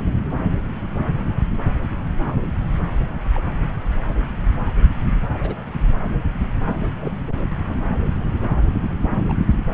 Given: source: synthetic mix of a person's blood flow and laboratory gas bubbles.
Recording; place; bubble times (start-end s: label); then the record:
Doppler ultrasound of blood flow; subclavian vein
3.34-3.42 s: bubbles
5.38-5.54 s: bubbles
7.00-7.12 s: bubbles
9.28-9.33 s: bubbles
From the record:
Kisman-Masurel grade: 121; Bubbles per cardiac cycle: 1 to 2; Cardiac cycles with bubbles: 10 to 50%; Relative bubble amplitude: barely perceptible (0.100 to 0.250); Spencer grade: 2 (many but less than half of the cardiac periods contain bubble signals, singularly or in groups); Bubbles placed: anywhere in the cardiac cycle